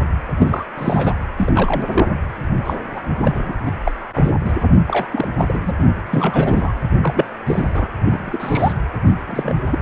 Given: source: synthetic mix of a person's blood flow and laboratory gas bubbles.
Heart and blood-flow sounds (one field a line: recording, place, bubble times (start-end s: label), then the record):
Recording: Doppler ultrasound of blood flow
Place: precordium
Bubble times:
0.37-0.66 s: bubbles
0.78-1.14 s: bubbles
1.38-2.08 s: bubbles
2.64-2.73 s: bubbles
2.92-3.02 s: bubbles
3.19-3.52 s: bubbles
3.66-3.72 s: bubbles
3.83-3.92 s: bubbles
4.14-4.31 s: bubbles
4.45-4.52 s: bubbles
4.88-5.08 s: bubbles
5.12-5.28 s: bubbles
5.37-5.74 s: bubbles
6.11-6.73 s: bubbles
7.01-7.26 s: bubbles
7.47-7.69 s: bubbles
7.74-7.88 s: bubbles
8.04-8.73 s: bubbles
9.27-9.54 s: bubbles
9.71-9.79 s: bubbles
From the record:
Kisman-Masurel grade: 242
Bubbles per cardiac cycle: several, 3 to 8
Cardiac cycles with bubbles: 100%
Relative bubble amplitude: moderate (0.250 to 0.450)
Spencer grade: 3 (all of the cardiac periods contain showers or single bubble signals, but not dominating or overriding the cardiac motion signals)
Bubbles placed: anywhere in the cardiac cycle